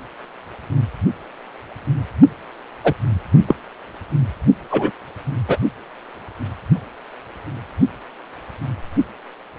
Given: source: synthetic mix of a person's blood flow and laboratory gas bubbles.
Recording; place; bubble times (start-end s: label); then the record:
Doppler ultrasound of blood flow; precordium
2.84-2.93 s: bubbles
3.47-3.55 s: bubbles
4.71-4.90 s: bubbles
5.48-5.57 s: bubbles
From the record:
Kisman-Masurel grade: 123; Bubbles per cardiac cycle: 1 to 2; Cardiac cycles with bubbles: 10 to 50%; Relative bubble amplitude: loud (0.450 to 0.775); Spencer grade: 2 (many but less than half of the cardiac periods contain bubble signals, singularly or in groups); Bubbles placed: only in the low amplitude regions of the cardiac cycle